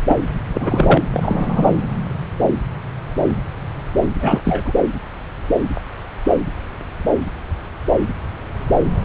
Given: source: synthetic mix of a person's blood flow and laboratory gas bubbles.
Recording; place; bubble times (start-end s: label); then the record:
Doppler ultrasound of blood flow; subclavian vein
0.08-0.16 s: bubbles
0.53-1.02 s: bubbles
1.12-1.72 s: bubbles
4.20-4.39 s: bubbles
4.45-4.73 s: bubbles
From the record:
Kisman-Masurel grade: 223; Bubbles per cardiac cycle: several, 3 to 8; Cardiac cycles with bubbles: 10 to 50%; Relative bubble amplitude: loud (0.450 to 0.775); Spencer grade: 2 (many but less than half of the cardiac periods contain bubble signals, singularly or in groups); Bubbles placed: anywhere in the cardiac cycle